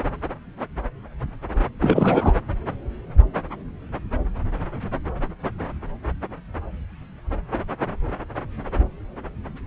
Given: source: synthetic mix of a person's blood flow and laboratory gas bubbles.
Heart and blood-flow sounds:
Doppler ultrasound of blood flow; subclavian vein
1.81-2.33 s: bubbles
From the record:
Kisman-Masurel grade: 213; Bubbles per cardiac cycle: several, 3 to 8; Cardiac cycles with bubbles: 1 to 10%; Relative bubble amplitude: loud (0.450 to 0.775); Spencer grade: 1 (occasional bubble signal discernible with the cardiac motion signal, with majority of cardiac periods free of bubbles); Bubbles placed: anywhere in the cardiac cycle

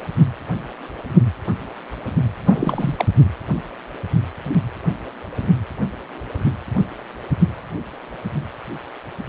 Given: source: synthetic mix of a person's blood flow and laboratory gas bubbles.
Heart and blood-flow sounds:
Doppler ultrasound of blood flow; precordium
2.46-3.06 s: bubbles
From the record:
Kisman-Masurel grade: 222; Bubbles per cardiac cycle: several, 3 to 8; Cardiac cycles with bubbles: 10 to 50%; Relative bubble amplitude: moderate (0.250 to 0.450); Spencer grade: 2 (many but less than half of the cardiac periods contain bubble signals, singularly or in groups); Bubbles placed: anywhere in the cardiac cycle

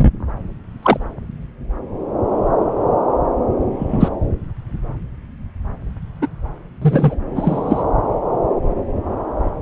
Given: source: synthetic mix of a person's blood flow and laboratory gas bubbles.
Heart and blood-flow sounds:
Doppler ultrasound of blood flow; subclavian vein
0.82-0.97 s: bubbles
3.79-4.08 s: bubbles
6.21-6.27 s: bubbles
6.81-7.15 s: bubbles
7.35-7.83 s: bubbles
From the record:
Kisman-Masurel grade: 123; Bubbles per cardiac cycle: 1 to 2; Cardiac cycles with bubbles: 10 to 50%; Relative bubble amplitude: loud (0.450 to 0.775); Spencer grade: 2 (many but less than half of the cardiac periods contain bubble signals, singularly or in groups); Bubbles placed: anywhere in the cardiac cycle

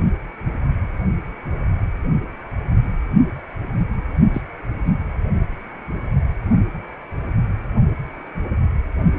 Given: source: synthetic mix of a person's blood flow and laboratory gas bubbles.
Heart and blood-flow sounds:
Doppler ultrasound of blood flow; precordium
4.33-4.41 s: bubbles
4.84-4.94 s: bubbles
From the record:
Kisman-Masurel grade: 122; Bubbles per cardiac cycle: 1 to 2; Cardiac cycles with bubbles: 10 to 50%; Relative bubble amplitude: moderate (0.250 to 0.450); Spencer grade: 2 (many but less than half of the cardiac periods contain bubble signals, singularly or in groups); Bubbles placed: only in the low amplitude regions of the cardiac cycle

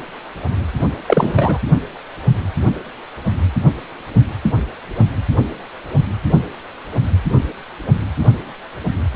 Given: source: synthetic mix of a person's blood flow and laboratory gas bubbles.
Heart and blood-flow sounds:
Doppler ultrasound of blood flow; precordium
1.06-1.59 s: bubbles
From the record:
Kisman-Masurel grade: 213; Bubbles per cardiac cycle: several, 3 to 8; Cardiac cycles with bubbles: 1 to 10%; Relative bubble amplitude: loud (0.450 to 0.775); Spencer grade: 1 (occasional bubble signal discernible with the cardiac motion signal, with majority of cardiac periods free of bubbles); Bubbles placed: only in the low amplitude regions of the cardiac cycle

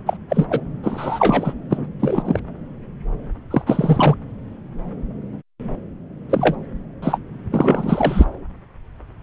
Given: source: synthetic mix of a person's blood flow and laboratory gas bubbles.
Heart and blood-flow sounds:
Doppler ultrasound of blood flow; subclavian vein
0.06-0.17 s: bubbles
0.29-0.46 s: bubbles
0.50-0.60 s: bubbles
0.83-1.54 s: bubbles
1.70-1.85 s: bubbles
2.00-2.40 s: bubbles
3.50-3.62 s: bubbles
3.67-4.15 s: bubbles
6.29-6.57 s: bubbles
7.02-7.20 s: bubbles
7.51-8.26 s: bubbles
From the record:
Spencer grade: 3 (all of the cardiac periods contain showers or single bubble signals, but not dominating or overriding the cardiac motion signals); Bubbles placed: anywhere in the cardiac cycle

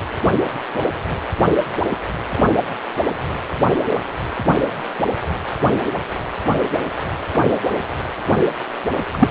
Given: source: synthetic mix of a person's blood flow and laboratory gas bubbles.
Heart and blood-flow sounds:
Doppler ultrasound of blood flow; precordium
9.13-9.29 s: bubbles
From the record:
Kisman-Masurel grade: 223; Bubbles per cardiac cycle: several, 3 to 8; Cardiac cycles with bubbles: 10 to 50%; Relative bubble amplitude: loud (0.450 to 0.775); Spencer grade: 2 (many but less than half of the cardiac periods contain bubble signals, singularly or in groups); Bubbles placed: anywhere in the cardiac cycle

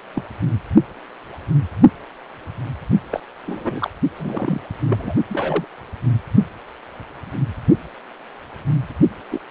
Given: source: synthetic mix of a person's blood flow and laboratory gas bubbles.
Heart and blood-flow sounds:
Doppler ultrasound of blood flow; precordium
0.14-0.23 s: bubbles
3.10-3.20 s: bubbles
3.46-3.90 s: bubbles
4.17-4.61 s: bubbles
4.88-5.14 s: bubbles
5.29-5.64 s: bubbles
9.30-9.41 s: bubbles
From the record:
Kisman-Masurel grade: 232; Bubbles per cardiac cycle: several, 3 to 8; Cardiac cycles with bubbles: 50 to 99%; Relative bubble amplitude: moderate (0.250 to 0.450); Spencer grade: 3 (all of the cardiac periods contain showers or single bubble signals, but not dominating or overriding the cardiac motion signals); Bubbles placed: only in the low amplitude regions of the cardiac cycle

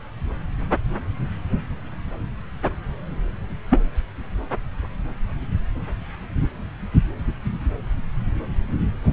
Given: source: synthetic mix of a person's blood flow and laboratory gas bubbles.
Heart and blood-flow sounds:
Doppler ultrasound of blood flow; subclavian vein
3.70-3.81 s: bubbles
From the record:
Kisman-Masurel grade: 113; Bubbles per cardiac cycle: 1 to 2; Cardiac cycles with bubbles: 1 to 10%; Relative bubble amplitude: loud (0.450 to 0.775); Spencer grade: 1 (occasional bubble signal discernible with the cardiac motion signal, with majority of cardiac periods free of bubbles); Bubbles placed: anywhere in the cardiac cycle

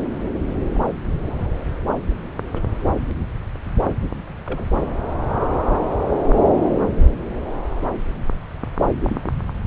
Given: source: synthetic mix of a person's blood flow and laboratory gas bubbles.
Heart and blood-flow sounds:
Doppler ultrasound of blood flow; subclavian vein
0.74-0.80 s: bubbles
1.23-1.34 s: bubbles
2.52-2.61 s: bubbles
4.46-4.69 s: bubbles
9.09-9.16 s: bubbles
9.25-9.31 s: bubbles
From the record:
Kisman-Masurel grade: 121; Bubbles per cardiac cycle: 1 to 2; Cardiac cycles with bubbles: 10 to 50%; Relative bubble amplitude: barely perceptible (0.100 to 0.250); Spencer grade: 2 (many but less than half of the cardiac periods contain bubble signals, singularly or in groups); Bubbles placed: anywhere in the cardiac cycle

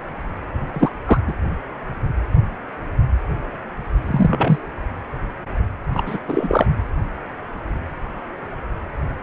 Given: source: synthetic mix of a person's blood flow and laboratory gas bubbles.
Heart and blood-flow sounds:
Doppler ultrasound of blood flow; precordium
0.72-0.91 s: bubbles
1.05-1.19 s: bubbles
1.27-1.33 s: bubbles
4.07-4.59 s: bubbles
5.94-6.04 s: bubbles
6.06-6.18 s: bubbles
6.28-6.66 s: bubbles
From the record:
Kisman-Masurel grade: 223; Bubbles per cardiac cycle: several, 3 to 8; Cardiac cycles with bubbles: 10 to 50%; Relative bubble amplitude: loud (0.450 to 0.775); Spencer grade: 2 (many but less than half of the cardiac periods contain bubble signals, singularly or in groups); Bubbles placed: anywhere in the cardiac cycle

